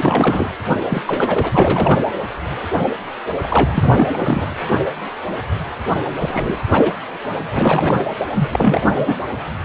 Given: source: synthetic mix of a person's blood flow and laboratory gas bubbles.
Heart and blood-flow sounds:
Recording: Doppler ultrasound of blood flow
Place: precordium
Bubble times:
0.00-0.53 s: bubbles
0.89-1.02 s: bubbles
1.06-1.99 s: bubbles
3.43-4.56 s: bubbles
6.18-6.60 s: bubbles
6.71-6.92 s: bubbles
7.52-8.04 s: bubbles
8.34-9.16 s: bubbles
From the record:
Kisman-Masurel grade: 332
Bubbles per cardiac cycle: rolling drumbeat, 9 or more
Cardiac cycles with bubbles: 50 to 99%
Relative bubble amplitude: moderate (0.250 to 0.450)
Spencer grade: 3 (all of the cardiac periods contain showers or single bubble signals, but not dominating or overriding the cardiac motion signals)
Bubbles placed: anywhere in the cardiac cycle

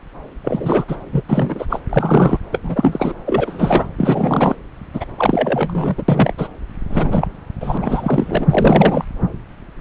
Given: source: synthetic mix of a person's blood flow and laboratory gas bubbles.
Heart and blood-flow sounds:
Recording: Doppler ultrasound of blood flow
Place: subclavian vein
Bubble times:
0.44-0.85 s: bubbles
0.88-0.96 s: bubbles
1.12-1.22 s: bubbles
1.28-1.66 s: bubbles
1.69-1.80 s: bubbles
1.89-2.40 s: bubbles
2.52-2.59 s: bubbles
2.62-3.14 s: bubbles
3.26-3.89 s: bubbles
3.98-4.55 s: bubbles
4.93-5.05 s: bubbles
5.18-5.95 s: bubbles
5.97-6.02 s: bubbles
6.08-6.33 s: bubbles
6.37-6.48 s: bubbles
6.89-7.28 s: bubbles
7.60-7.77 s: bubbles
7.81-8.46 s: bubbles
8.50-9.04 s: bubbles
From the record:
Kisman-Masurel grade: 333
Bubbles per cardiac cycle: rolling drumbeat, 9 or more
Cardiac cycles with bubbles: 50 to 99%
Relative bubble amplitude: loud (0.450 to 0.775)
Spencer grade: 3 (all of the cardiac periods contain showers or single bubble signals, but not dominating or overriding the cardiac motion signals)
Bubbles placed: anywhere in the cardiac cycle

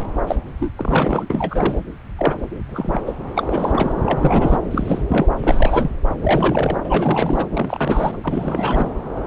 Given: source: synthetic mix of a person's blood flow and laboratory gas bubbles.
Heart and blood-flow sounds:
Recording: Doppler ultrasound of blood flow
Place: subclavian vein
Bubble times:
0.27-0.36 s: bubbles
0.59-0.71 s: bubbles
0.77-1.26 s: bubbles
1.29-1.78 s: bubbles
2.19-2.35 s: bubbles
2.69-3.01 s: bubbles
3.06-3.16 s: bubbles
3.35-3.92 s: bubbles
3.96-4.03 s: bubbles
4.05-4.58 s: bubbles
4.71-5.05 s: bubbles
5.09-5.28 s: bubbles
5.38-5.91 s: bubbles
6.23-6.78 s: bubbles
6.83-7.46 s: bubbles
7.53-8.18 s: bubbles
8.23-8.90 s: bubbles
From the record:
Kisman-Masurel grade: 342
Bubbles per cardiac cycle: rolling drumbeat, 9 or more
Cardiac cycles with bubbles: 100%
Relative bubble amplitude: moderate (0.250 to 0.450)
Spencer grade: 3 (all of the cardiac periods contain showers or single bubble signals, but not dominating or overriding the cardiac motion signals)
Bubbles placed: anywhere in the cardiac cycle

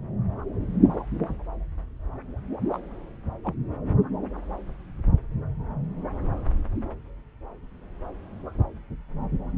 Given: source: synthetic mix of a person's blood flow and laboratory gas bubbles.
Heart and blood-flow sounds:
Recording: Doppler ultrasound of blood flow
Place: subclavian vein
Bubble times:
2.71-2.80 s: bubbles
3.44-3.54 s: bubbles
From the record:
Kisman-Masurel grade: 111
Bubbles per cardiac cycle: 1 to 2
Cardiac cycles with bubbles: 1 to 10%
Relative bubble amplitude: barely perceptible (0.100 to 0.250)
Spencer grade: 1 (occasional bubble signal discernible with the cardiac motion signal, with majority of cardiac periods free of bubbles)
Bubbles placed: anywhere in the cardiac cycle

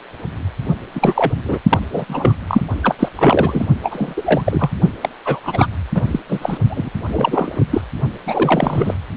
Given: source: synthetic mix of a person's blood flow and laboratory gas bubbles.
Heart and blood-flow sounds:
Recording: Doppler ultrasound of blood flow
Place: precordium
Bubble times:
0.94-1.33 s: bubbles
1.44-1.58 s: bubbles
1.69-1.79 s: bubbles
1.92-2.34 s: bubbles
2.47-2.62 s: bubbles
2.83-2.95 s: bubbles
2.99-3.09 s: bubbles
3.16-3.67 s: bubbles
3.83-4.42 s: bubbles
4.44-4.70 s: bubbles
5.01-5.09 s: bubbles
5.25-5.39 s: bubbles
5.43-5.67 s: bubbles
5.94-6.02 s: bubbles
6.06-6.19 s: bubbles
6.28-6.57 s: bubbles
6.69-6.90 s: bubbles
7.10-7.64 s: bubbles
7.70-7.81 s: bubbles
8.26-8.95 s: bubbles
From the record:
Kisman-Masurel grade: 333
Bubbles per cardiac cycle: rolling drumbeat, 9 or more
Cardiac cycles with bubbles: 50 to 99%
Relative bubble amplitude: loud (0.450 to 0.775)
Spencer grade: 3 (all of the cardiac periods contain showers or single bubble signals, but not dominating or overriding the cardiac motion signals)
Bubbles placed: only in the low amplitude regions of the cardiac cycle

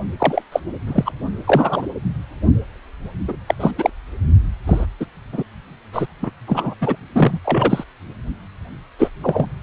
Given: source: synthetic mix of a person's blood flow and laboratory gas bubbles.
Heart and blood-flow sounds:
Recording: Doppler ultrasound of blood flow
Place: precordium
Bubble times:
0.19-0.42 s: bubbles
0.52-0.60 s: bubbles
0.87-1.11 s: bubbles
1.47-1.87 s: bubbles
3.27-3.36 s: bubbles
3.47-3.54 s: bubbles
3.60-3.71 s: bubbles
3.78-3.90 s: bubbles
4.66-4.86 s: bubbles
5.00-5.05 s: bubbles
5.32-5.43 s: bubbles
5.92-6.07 s: bubbles
6.22-6.30 s: bubbles
6.47-6.75 s: bubbles
6.80-6.96 s: bubbles
7.14-7.39 s: bubbles
7.44-7.84 s: bubbles
8.99-9.10 s: bubbles
9.23-9.46 s: bubbles
From the record:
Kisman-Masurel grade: 243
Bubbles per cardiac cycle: several, 3 to 8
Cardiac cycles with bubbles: 100%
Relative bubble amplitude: loud (0.450 to 0.775)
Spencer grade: 3 (all of the cardiac periods contain showers or single bubble signals, but not dominating or overriding the cardiac motion signals)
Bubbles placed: only in the low amplitude regions of the cardiac cycle

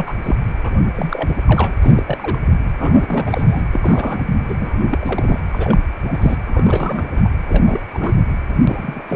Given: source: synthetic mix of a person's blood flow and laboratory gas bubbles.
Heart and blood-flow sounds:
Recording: Doppler ultrasound of blood flow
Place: precordium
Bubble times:
0.00-0.14 s: bubbles
0.22-0.36 s: bubbles
0.62-0.82 s: bubbles
0.95-1.36 s: bubbles
1.46-1.75 s: bubbles
1.83-2.04 s: bubbles
2.06-2.41 s: bubbles
2.78-3.63 s: bubbles
3.70-4.36 s: bubbles
4.48-4.54 s: bubbles
4.60-5.40 s: bubbles
5.53-5.79 s: bubbles
6.02-6.36 s: bubbles
6.46-7.04 s: bubbles
7.08-7.29 s: bubbles
7.48-7.80 s: bubbles
7.93-8.23 s: bubbles
8.62-9.01 s: bubbles
9.08-9.16 s: bubbles
From the record:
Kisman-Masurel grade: 332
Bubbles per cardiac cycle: rolling drumbeat, 9 or more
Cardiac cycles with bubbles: 50 to 99%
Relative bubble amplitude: moderate (0.250 to 0.450)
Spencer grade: 3 (all of the cardiac periods contain showers or single bubble signals, but not dominating or overriding the cardiac motion signals)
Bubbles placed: anywhere in the cardiac cycle

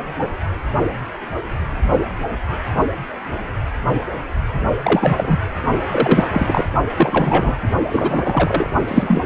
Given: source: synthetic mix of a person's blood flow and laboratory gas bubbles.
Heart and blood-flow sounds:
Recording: Doppler ultrasound of blood flow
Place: precordium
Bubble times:
4.84-5.40 s: bubbles
5.91-6.28 s: bubbles
6.32-6.68 s: bubbles
6.97-7.58 s: bubbles
7.89-8.70 s: bubbles
8.88-9.23 s: bubbles
From the record:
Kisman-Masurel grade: 333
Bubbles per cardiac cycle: rolling drumbeat, 9 or more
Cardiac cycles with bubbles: 50 to 99%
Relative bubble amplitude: loud (0.450 to 0.775)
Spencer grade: 3 (all of the cardiac periods contain showers or single bubble signals, but not dominating or overriding the cardiac motion signals)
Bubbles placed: only in the low amplitude regions of the cardiac cycle

